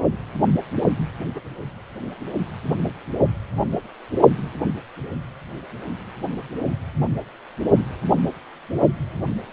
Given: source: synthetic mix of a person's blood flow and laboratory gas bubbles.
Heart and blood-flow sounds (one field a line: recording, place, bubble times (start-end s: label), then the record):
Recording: Doppler ultrasound of blood flow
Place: precordium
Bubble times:
0.80-0.93 s: bubbles
1.35-1.40 s: bubbles
From the record:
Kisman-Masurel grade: 121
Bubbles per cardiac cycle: 1 to 2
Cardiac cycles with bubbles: 10 to 50%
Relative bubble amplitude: barely perceptible (0.100 to 0.250)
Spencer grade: 2 (many but less than half of the cardiac periods contain bubble signals, singularly or in groups)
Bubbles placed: only in the low amplitude regions of the cardiac cycle